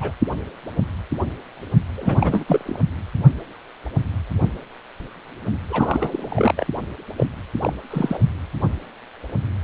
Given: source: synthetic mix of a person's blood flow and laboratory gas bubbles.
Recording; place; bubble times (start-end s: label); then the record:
Doppler ultrasound of blood flow; precordium
0.00-0.12 s: bubbles
1.95-2.44 s: bubbles
2.47-2.79 s: bubbles
5.70-6.54 s: bubbles
6.57-6.67 s: bubbles
7.17-7.27 s: bubbles
7.61-7.73 s: bubbles
7.90-8.19 s: bubbles
8.59-8.68 s: bubbles
From the record:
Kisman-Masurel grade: 222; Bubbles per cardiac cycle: several, 3 to 8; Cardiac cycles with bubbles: 10 to 50%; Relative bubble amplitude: moderate (0.250 to 0.450); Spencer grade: 2 (many but less than half of the cardiac periods contain bubble signals, singularly or in groups); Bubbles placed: anywhere in the cardiac cycle